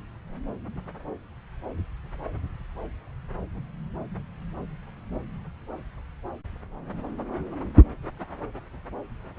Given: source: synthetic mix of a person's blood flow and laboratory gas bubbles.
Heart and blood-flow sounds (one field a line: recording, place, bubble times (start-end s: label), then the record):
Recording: Doppler ultrasound of blood flow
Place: subclavian vein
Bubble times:
no bubbles
From the record:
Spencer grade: 0 (complete lack of bubble signals)